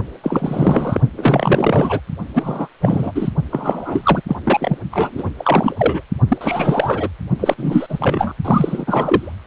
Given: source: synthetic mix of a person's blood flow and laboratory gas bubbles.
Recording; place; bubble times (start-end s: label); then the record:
Doppler ultrasound of blood flow; precordium
0.23-1.00 s: bubbles
1.17-2.00 s: bubbles
2.34-2.67 s: bubbles
2.81-3.12 s: bubbles
3.15-3.30 s: bubbles
3.51-4.21 s: bubbles
4.27-4.36 s: bubbles
4.45-4.78 s: bubbles
4.92-5.31 s: bubbles
5.38-6.04 s: bubbles
6.28-6.38 s: bubbles
6.41-7.08 s: bubbles
7.40-8.33 s: bubbles
8.45-9.35 s: bubbles
From the record:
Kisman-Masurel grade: 333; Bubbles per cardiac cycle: rolling drumbeat, 9 or more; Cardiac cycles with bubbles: 50 to 99%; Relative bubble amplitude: loud (0.450 to 0.775); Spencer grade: 3 (all of the cardiac periods contain showers or single bubble signals, but not dominating or overriding the cardiac motion signals); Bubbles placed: only in the low amplitude regions of the cardiac cycle